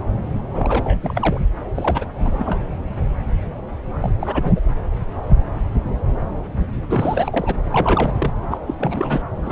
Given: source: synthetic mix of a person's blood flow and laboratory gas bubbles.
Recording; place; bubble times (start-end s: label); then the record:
Doppler ultrasound of blood flow; subclavian vein
0.51-1.42 s: bubbles
1.75-2.05 s: bubbles
2.19-2.60 s: bubbles
4.01-4.61 s: bubbles
6.89-7.55 s: bubbles
7.64-8.31 s: bubbles
8.50-8.57 s: bubbles
8.66-8.74 s: bubbles
8.78-9.22 s: bubbles
9.36-9.52 s: bubbles
From the record:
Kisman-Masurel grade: 332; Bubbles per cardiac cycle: rolling drumbeat, 9 or more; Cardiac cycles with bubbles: 50 to 99%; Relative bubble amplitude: moderate (0.250 to 0.450); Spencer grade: 3 (all of the cardiac periods contain showers or single bubble signals, but not dominating or overriding the cardiac motion signals); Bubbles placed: anywhere in the cardiac cycle